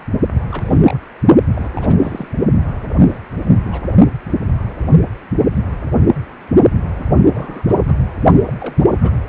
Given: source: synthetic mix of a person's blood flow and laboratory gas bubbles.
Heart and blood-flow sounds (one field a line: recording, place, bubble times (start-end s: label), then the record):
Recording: Doppler ultrasound of blood flow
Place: precordium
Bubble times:
0.49-0.99 s: bubbles
1.53-2.28 s: bubbles
2.99-3.07 s: bubbles
3.10-3.18 s: bubbles
3.45-3.50 s: bubbles
3.63-3.83 s: bubbles
6.96-7.97 s: bubbles
8.47-8.53 s: bubbles
8.60-9.12 s: bubbles
From the record:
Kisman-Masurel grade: 221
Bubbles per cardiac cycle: several, 3 to 8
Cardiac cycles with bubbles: 10 to 50%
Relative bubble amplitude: barely perceptible (0.100 to 0.250)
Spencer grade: 2 (many but less than half of the cardiac periods contain bubble signals, singularly or in groups)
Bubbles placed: only in the low amplitude regions of the cardiac cycle